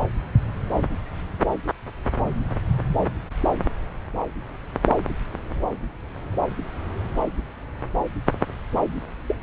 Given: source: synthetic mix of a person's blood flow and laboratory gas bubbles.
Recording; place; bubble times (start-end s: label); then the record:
Doppler ultrasound of blood flow; subclavian vein
9.27-9.36 s: bubbles
From the record:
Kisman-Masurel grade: 112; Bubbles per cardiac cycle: 1 to 2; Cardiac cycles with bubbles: 1 to 10%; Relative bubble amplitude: moderate (0.250 to 0.450); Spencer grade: 1 (occasional bubble signal discernible with the cardiac motion signal, with majority of cardiac periods free of bubbles); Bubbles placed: anywhere in the cardiac cycle